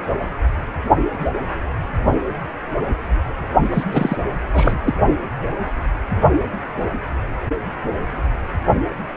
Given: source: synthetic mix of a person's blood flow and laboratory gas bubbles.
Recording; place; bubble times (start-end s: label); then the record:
Doppler ultrasound of blood flow; precordium
3.72-3.83 s: bubbles
3.92-4.17 s: bubbles
4.52-4.78 s: bubbles
4.83-4.93 s: bubbles
From the record:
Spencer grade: 1 (occasional bubble signal discernible with the cardiac motion signal, with majority of cardiac periods free of bubbles); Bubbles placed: only in the low amplitude regions of the cardiac cycle